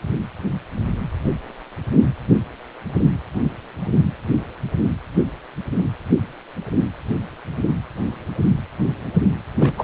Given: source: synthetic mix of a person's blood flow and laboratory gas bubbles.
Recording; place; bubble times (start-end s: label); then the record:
Doppler ultrasound of blood flow; precordium
9.60-9.73 s: bubbles
9.78-9.84 s: bubbles
From the record:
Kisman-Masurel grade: 213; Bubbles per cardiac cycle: several, 3 to 8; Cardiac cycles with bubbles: 1 to 10%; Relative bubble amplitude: loud (0.450 to 0.775); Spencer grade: 1 (occasional bubble signal discernible with the cardiac motion signal, with majority of cardiac periods free of bubbles); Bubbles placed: anywhere in the cardiac cycle